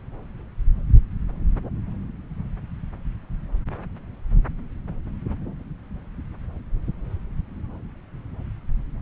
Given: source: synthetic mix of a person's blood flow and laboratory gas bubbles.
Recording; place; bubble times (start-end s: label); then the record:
Doppler ultrasound of blood flow; subclavian vein
no bubbles
From the record:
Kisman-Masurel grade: 000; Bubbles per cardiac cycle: 0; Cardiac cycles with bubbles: 0%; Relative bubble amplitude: no bubbles discernible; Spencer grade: 0 (complete lack of bubble signals)